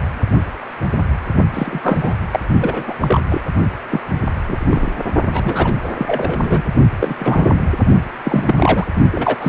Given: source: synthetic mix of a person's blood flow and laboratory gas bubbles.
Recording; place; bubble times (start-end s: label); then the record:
Doppler ultrasound of blood flow; precordium
1.54-2.15 s: bubbles
2.31-2.40 s: bubbles
2.60-2.94 s: bubbles
3.00-3.21 s: bubbles
3.30-3.42 s: bubbles
3.91-4.00 s: bubbles
4.47-4.90 s: bubbles
5.30-5.74 s: bubbles
5.83-5.89 s: bubbles
5.97-6.62 s: bubbles
7.00-7.14 s: bubbles
7.19-7.62 s: bubbles
8.24-8.87 s: bubbles
9.12-9.36 s: bubbles
9.40-9.49 s: bubbles
From the record:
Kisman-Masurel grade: 233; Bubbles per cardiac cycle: several, 3 to 8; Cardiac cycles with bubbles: 50 to 99%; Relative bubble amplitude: loud (0.450 to 0.775); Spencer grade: 3 (all of the cardiac periods contain showers or single bubble signals, but not dominating or overriding the cardiac motion signals); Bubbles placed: only in the low amplitude regions of the cardiac cycle